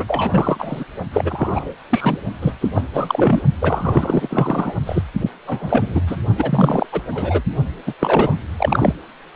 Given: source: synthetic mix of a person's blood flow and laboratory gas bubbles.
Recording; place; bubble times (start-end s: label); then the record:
Doppler ultrasound of blood flow; precordium
0.00-0.05 s: bubbles
0.08-0.84 s: bubbles
1.13-1.74 s: bubbles
1.90-2.18 s: bubbles
2.41-2.52 s: bubbles
2.60-2.69 s: bubbles
2.75-2.82 s: bubbles
2.94-3.41 s: bubbles
3.61-4.74 s: bubbles
4.86-5.02 s: bubbles
5.20-5.31 s: bubbles
5.47-6.01 s: bubbles
6.06-6.17 s: bubbles
6.37-6.87 s: bubbles
6.92-7.00 s: bubbles
7.12-7.41 s: bubbles
7.86-7.93 s: bubbles
8.00-8.35 s: bubbles
8.58-8.94 s: bubbles
From the record:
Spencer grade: 3 (all of the cardiac periods contain showers or single bubble signals, but not dominating or overriding the cardiac motion signals); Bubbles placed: only in the low amplitude regions of the cardiac cycle